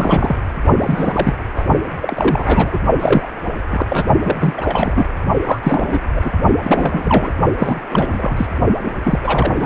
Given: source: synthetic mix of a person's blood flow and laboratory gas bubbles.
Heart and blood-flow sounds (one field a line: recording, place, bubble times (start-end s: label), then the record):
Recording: Doppler ultrasound of blood flow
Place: precordium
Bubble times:
0.00-0.37 s: bubbles
0.77-1.35 s: bubbles
1.56-1.65 s: bubbles
2.00-2.78 s: bubbles
3.00-3.28 s: bubbles
3.71-3.86 s: bubbles
3.89-4.05 s: bubbles
4.22-4.54 s: bubbles
4.57-5.08 s: bubbles
5.45-5.59 s: bubbles
5.63-5.99 s: bubbles
6.16-6.31 s: bubbles
6.63-7.32 s: bubbles
7.59-7.80 s: bubbles
7.89-8.47 s: bubbles
8.84-8.91 s: bubbles
9.04-9.19 s: bubbles
9.23-9.52 s: bubbles
9.54-9.66 s: bubbles
From the record:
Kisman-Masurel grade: 342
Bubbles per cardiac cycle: rolling drumbeat, 9 or more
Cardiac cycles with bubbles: 100%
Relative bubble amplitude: moderate (0.250 to 0.450)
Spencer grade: 3 (all of the cardiac periods contain showers or single bubble signals, but not dominating or overriding the cardiac motion signals)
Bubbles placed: only in the low amplitude regions of the cardiac cycle